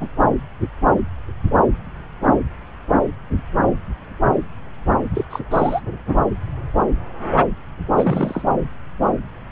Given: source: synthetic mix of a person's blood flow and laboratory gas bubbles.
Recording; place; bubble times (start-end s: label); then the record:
Doppler ultrasound of blood flow; subclavian vein
0.00-0.08 s: bubbles
5.14-5.25 s: bubbles
5.30-5.39 s: bubbles
5.50-5.80 s: bubbles
7.96-8.42 s: bubbles
From the record:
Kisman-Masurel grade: 222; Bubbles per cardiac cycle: several, 3 to 8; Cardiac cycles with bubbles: 10 to 50%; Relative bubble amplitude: moderate (0.250 to 0.450); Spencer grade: 2 (many but less than half of the cardiac periods contain bubble signals, singularly or in groups); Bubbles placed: anywhere in the cardiac cycle